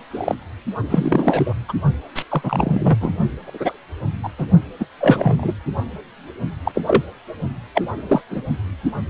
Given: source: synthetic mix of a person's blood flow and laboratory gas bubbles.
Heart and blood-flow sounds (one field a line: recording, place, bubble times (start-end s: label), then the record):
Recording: Doppler ultrasound of blood flow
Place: precordium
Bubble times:
0.11-0.35 s: bubbles
0.90-1.54 s: bubbles
1.69-1.73 s: bubbles
2.15-2.25 s: bubbles
2.29-2.98 s: bubbles
3.00-3.12 s: bubbles
3.46-3.78 s: bubbles
4.23-4.29 s: bubbles
4.38-4.46 s: bubbles
4.79-4.86 s: bubbles
5.00-5.54 s: bubbles
6.64-6.72 s: bubbles
6.75-6.82 s: bubbles
6.87-7.02 s: bubbles
7.74-7.82 s: bubbles
8.08-8.21 s: bubbles
8.30-8.42 s: bubbles
From the record:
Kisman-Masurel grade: 243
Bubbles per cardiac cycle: several, 3 to 8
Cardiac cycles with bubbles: 100%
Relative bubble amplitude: loud (0.450 to 0.775)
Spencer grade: 3 (all of the cardiac periods contain showers or single bubble signals, but not dominating or overriding the cardiac motion signals)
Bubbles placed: only in the low amplitude regions of the cardiac cycle